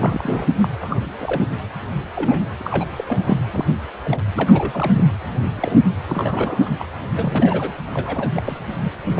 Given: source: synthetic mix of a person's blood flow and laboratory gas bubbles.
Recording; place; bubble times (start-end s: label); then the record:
Doppler ultrasound of blood flow; precordium
0.00-0.48 s: bubbles
0.60-0.68 s: bubbles
0.81-1.07 s: bubbles
1.20-1.43 s: bubbles
2.15-2.43 s: bubbles
2.60-3.38 s: bubbles
3.51-3.65 s: bubbles
4.03-4.21 s: bubbles
4.36-5.09 s: bubbles
5.55-6.00 s: bubbles
6.07-6.71 s: bubbles
6.78-6.97 s: bubbles
7.15-7.73 s: bubbles
7.94-8.29 s: bubbles
8.36-8.42 s: bubbles
8.45-8.59 s: bubbles
8.81-8.91 s: bubbles
9.06-9.19 s: bubbles
From the record:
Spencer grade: 3 (all of the cardiac periods contain showers or single bubble signals, but not dominating or overriding the cardiac motion signals); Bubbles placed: anywhere in the cardiac cycle